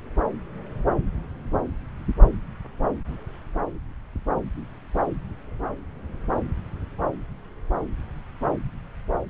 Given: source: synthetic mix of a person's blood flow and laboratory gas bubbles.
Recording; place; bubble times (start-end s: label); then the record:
Doppler ultrasound of blood flow; subclavian vein
no bubbles
From the record:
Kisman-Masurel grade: 000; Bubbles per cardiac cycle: 0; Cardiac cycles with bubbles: 0%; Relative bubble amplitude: no bubbles discernible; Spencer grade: 0 (complete lack of bubble signals)